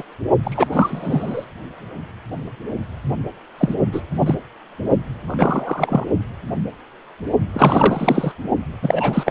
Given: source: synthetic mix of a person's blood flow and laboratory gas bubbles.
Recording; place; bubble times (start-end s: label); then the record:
Doppler ultrasound of blood flow; precordium
0.00-0.03 s: bubbles
0.43-0.67 s: bubbles
0.72-1.46 s: bubbles
3.58-3.74 s: bubbles
3.92-4.01 s: bubbles
4.20-4.34 s: bubbles
5.27-6.05 s: bubbles
7.54-8.32 s: bubbles
8.83-9.30 s: bubbles
From the record:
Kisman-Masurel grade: 233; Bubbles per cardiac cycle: several, 3 to 8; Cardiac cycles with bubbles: 50 to 99%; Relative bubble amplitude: loud (0.450 to 0.775); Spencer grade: 3 (all of the cardiac periods contain showers or single bubble signals, but not dominating or overriding the cardiac motion signals); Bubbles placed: only in the low amplitude regions of the cardiac cycle